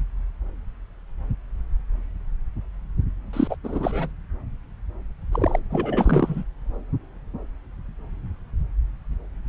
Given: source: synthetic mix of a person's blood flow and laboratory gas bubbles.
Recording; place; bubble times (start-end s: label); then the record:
Doppler ultrasound of blood flow; subclavian vein
3.33-3.56 s: bubbles
3.63-4.10 s: bubbles
5.32-5.59 s: bubbles
5.71-6.43 s: bubbles
From the record:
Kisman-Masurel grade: 222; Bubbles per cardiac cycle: several, 3 to 8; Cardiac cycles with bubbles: 10 to 50%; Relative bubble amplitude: moderate (0.250 to 0.450); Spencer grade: 2 (many but less than half of the cardiac periods contain bubble signals, singularly or in groups); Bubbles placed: anywhere in the cardiac cycle